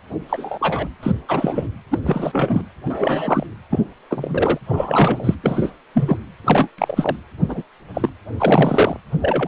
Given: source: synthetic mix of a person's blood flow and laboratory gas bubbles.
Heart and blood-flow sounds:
Doppler ultrasound of blood flow; precordium
0.29-0.88 s: bubbles
1.03-1.12 s: bubbles
1.28-1.68 s: bubbles
1.91-1.99 s: bubbles
2.04-2.66 s: bubbles
2.86-3.46 s: bubbles
3.70-3.85 s: bubbles
4.11-4.58 s: bubbles
4.68-5.35 s: bubbles
5.44-5.73 s: bubbles
5.94-6.17 s: bubbles
6.44-6.68 s: bubbles
6.78-7.16 s: bubbles
7.49-7.62 s: bubbles
7.94-8.09 s: bubbles
8.38-8.97 s: bubbles
9.21-9.48 s: bubbles
From the record:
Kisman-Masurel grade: 242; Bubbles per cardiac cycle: several, 3 to 8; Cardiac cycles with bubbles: 100%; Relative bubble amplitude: moderate (0.250 to 0.450); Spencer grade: 3 (all of the cardiac periods contain showers or single bubble signals, but not dominating or overriding the cardiac motion signals); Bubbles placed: anywhere in the cardiac cycle

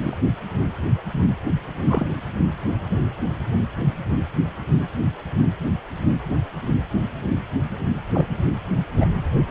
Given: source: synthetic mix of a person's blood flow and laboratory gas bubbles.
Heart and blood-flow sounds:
Doppler ultrasound of blood flow; precordium
0.00-0.17 s: bubbles
1.84-2.12 s: bubbles
8.14-8.26 s: bubbles
8.96-9.06 s: bubbles
From the record:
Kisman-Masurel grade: 122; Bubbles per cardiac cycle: 1 to 2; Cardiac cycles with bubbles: 10 to 50%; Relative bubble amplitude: moderate (0.250 to 0.450); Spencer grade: 2 (many but less than half of the cardiac periods contain bubble signals, singularly or in groups); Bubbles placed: anywhere in the cardiac cycle

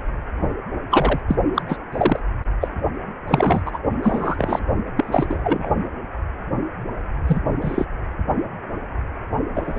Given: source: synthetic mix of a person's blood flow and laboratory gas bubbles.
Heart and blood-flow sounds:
Doppler ultrasound of blood flow; precordium
0.91-1.20 s: bubbles
1.28-1.35 s: bubbles
1.54-1.62 s: bubbles
1.69-1.77 s: bubbles
1.92-2.19 s: bubbles
2.60-2.68 s: bubbles
3.27-3.61 s: bubbles
3.65-3.79 s: bubbles
4.03-4.59 s: bubbles
4.96-5.72 s: bubbles
7.27-7.40 s: bubbles
7.61-7.85 s: bubbles
9.54-9.79 s: bubbles
From the record:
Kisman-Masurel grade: 233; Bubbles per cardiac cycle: several, 3 to 8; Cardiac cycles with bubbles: 50 to 99%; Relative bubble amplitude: loud (0.450 to 0.775); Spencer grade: 3 (all of the cardiac periods contain showers or single bubble signals, but not dominating or overriding the cardiac motion signals); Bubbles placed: anywhere in the cardiac cycle

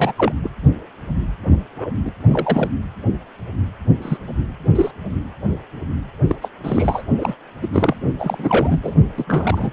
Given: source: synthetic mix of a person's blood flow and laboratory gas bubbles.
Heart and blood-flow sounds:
Doppler ultrasound of blood flow; precordium
0.00-0.12 s: bubbles
0.16-0.32 s: bubbles
0.43-0.49 s: bubbles
1.77-1.91 s: bubbles
2.04-2.11 s: bubbles
2.27-2.69 s: bubbles
4.01-4.17 s: bubbles
4.75-4.92 s: bubbles
6.29-6.35 s: bubbles
6.42-6.48 s: bubbles
6.63-7.02 s: bubbles
7.17-7.35 s: bubbles
7.62-7.68 s: bubbles
7.72-7.96 s: bubbles
8.18-8.79 s: bubbles
8.82-8.95 s: bubbles
9.16-9.72 s: bubbles
From the record:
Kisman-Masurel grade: 232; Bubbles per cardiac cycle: several, 3 to 8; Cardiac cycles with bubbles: 50 to 99%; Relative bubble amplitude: moderate (0.250 to 0.450); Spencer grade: 3 (all of the cardiac periods contain showers or single bubble signals, but not dominating or overriding the cardiac motion signals); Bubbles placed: only in the low amplitude regions of the cardiac cycle

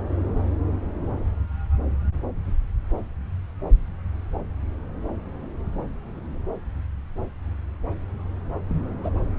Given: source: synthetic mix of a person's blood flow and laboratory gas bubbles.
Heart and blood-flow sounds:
Doppler ultrasound of blood flow; subclavian vein
8.69-8.86 s: bubbles
9.03-9.10 s: bubbles
From the record:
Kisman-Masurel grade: 111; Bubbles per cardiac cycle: 1 to 2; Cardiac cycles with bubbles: 1 to 10%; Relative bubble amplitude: barely perceptible (0.100 to 0.250); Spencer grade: 1 (occasional bubble signal discernible with the cardiac motion signal, with majority of cardiac periods free of bubbles); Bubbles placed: anywhere in the cardiac cycle

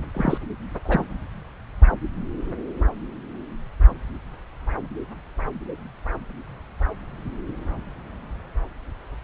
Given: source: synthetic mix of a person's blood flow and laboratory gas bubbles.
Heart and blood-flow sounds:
Doppler ultrasound of blood flow; subclavian vein
0.14-0.37 s: bubbles
0.85-1.05 s: bubbles
From the record:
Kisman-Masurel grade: 212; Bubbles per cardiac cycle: several, 3 to 8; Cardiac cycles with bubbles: 1 to 10%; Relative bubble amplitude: moderate (0.250 to 0.450); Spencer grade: 1 (occasional bubble signal discernible with the cardiac motion signal, with majority of cardiac periods free of bubbles); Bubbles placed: anywhere in the cardiac cycle

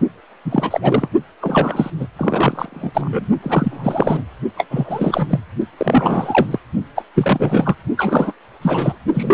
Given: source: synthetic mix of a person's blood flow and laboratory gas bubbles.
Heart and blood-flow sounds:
Doppler ultrasound of blood flow; precordium
0.45-1.08 s: bubbles
1.41-1.91 s: bubbles
1.99-2.08 s: bubbles
2.16-2.92 s: bubbles
2.94-3.27 s: bubbles
3.42-4.24 s: bubbles
4.57-4.66 s: bubbles
4.71-5.40 s: bubbles
5.77-6.59 s: bubbles
6.95-7.04 s: bubbles
7.15-7.75 s: bubbles
7.97-8.33 s: bubbles
8.62-8.97 s: bubbles
9.14-9.34 s: bubbles
From the record:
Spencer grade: 3 (all of the cardiac periods contain showers or single bubble signals, but not dominating or overriding the cardiac motion signals); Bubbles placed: only in the low amplitude regions of the cardiac cycle

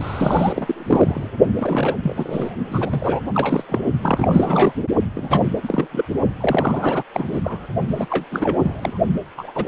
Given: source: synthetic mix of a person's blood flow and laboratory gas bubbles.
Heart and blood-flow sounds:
Doppler ultrasound of blood flow; precordium
0.01-1.29 s: bubbles
1.55-1.96 s: bubbles
2.03-2.51 s: bubbles
2.71-3.21 s: bubbles
3.34-3.65 s: bubbles
3.69-3.81 s: bubbles
4.02-4.73 s: bubbles
5.15-5.41 s: bubbles
5.63-5.87 s: bubbles
5.92-6.04 s: bubbles
6.41-7.03 s: bubbles
7.14-7.41 s: bubbles
7.44-7.66 s: bubbles
7.89-8.06 s: bubbles
8.10-8.25 s: bubbles
8.31-8.98 s: bubbles
9.37-9.51 s: bubbles
9.54-9.68 s: bubbles
From the record:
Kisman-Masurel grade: 342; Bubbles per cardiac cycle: rolling drumbeat, 9 or more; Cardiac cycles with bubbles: 100%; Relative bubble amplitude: moderate (0.250 to 0.450); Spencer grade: 3 (all of the cardiac periods contain showers or single bubble signals, but not dominating or overriding the cardiac motion signals); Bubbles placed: only in the low amplitude regions of the cardiac cycle

